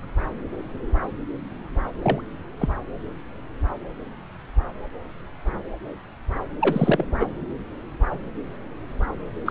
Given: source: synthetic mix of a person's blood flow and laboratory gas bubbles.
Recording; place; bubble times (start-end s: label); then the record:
Doppler ultrasound of blood flow; subclavian vein
2.02-2.21 s: bubbles
2.59-2.69 s: bubbles
6.61-7.04 s: bubbles
7.20-7.26 s: bubbles
9.46-9.51 s: bubbles
From the record:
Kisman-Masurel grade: 222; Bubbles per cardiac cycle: several, 3 to 8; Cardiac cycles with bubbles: 10 to 50%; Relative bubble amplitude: moderate (0.250 to 0.450); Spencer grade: 2 (many but less than half of the cardiac periods contain bubble signals, singularly or in groups); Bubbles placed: anywhere in the cardiac cycle